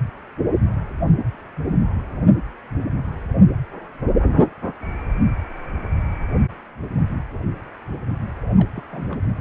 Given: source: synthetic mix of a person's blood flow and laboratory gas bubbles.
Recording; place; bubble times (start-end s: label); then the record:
Doppler ultrasound of blood flow; precordium
8.56-8.68 s: bubbles
8.73-8.84 s: bubbles
8.92-9.05 s: bubbles
9.09-9.19 s: bubbles
From the record:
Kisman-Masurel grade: 211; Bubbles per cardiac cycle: several, 3 to 8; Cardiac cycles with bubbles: 1 to 10%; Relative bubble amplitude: barely perceptible (0.100 to 0.250); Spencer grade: 1 (occasional bubble signal discernible with the cardiac motion signal, with majority of cardiac periods free of bubbles); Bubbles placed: only in the low amplitude regions of the cardiac cycle